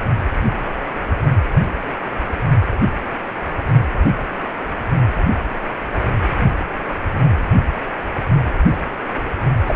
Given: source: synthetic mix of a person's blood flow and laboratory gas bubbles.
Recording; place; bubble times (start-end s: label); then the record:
Doppler ultrasound of blood flow; precordium
9.66-9.75 s: bubbles
From the record:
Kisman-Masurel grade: 113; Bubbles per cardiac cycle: 1 to 2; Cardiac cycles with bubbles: 1 to 10%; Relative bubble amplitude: loud (0.450 to 0.775); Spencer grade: 1 (occasional bubble signal discernible with the cardiac motion signal, with majority of cardiac periods free of bubbles); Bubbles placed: anywhere in the cardiac cycle